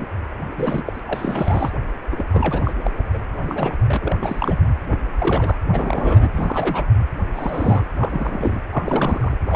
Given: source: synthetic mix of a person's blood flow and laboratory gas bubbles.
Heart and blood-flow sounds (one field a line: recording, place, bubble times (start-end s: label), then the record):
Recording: Doppler ultrasound of blood flow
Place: precordium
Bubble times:
0.00-0.07 s: bubbles
0.57-0.84 s: bubbles
0.86-0.99 s: bubbles
1.05-1.71 s: bubbles
2.12-2.24 s: bubbles
2.33-2.73 s: bubbles
2.81-2.91 s: bubbles
3.13-3.19 s: bubbles
3.49-3.75 s: bubbles
3.88-4.16 s: bubbles
4.21-4.58 s: bubbles
4.88-5.00 s: bubbles
5.18-5.58 s: bubbles
5.71-6.30 s: bubbles
6.34-6.84 s: bubbles
7.33-7.84 s: bubbles
7.96-8.62 s: bubbles
8.71-9.37 s: bubbles
9.50-9.55 s: bubbles
From the record:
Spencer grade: 3 (all of the cardiac periods contain showers or single bubble signals, but not dominating or overriding the cardiac motion signals)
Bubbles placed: anywhere in the cardiac cycle